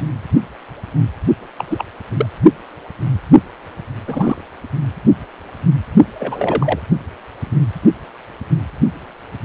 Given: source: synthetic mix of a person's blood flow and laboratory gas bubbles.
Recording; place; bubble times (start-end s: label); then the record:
Doppler ultrasound of blood flow; precordium
1.58-1.65 s: bubbles
1.70-1.85 s: bubbles
2.17-2.26 s: bubbles
4.05-4.44 s: bubbles
6.19-6.79 s: bubbles
From the record:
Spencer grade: 2 (many but less than half of the cardiac periods contain bubble signals, singularly or in groups); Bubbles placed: only in the low amplitude regions of the cardiac cycle